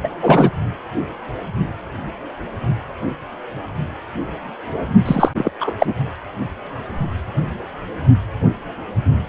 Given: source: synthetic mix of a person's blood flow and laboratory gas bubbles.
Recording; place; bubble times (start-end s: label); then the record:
Doppler ultrasound of blood flow; precordium
0.04-0.09 s: bubbles
0.22-0.50 s: bubbles
5.05-5.29 s: bubbles
5.37-5.51 s: bubbles
5.60-5.71 s: bubbles
5.79-5.94 s: bubbles
From the record:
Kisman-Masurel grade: 223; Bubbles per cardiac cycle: several, 3 to 8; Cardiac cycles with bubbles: 10 to 50%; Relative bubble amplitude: loud (0.450 to 0.775); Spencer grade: 2 (many but less than half of the cardiac periods contain bubble signals, singularly or in groups); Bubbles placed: only in the low amplitude regions of the cardiac cycle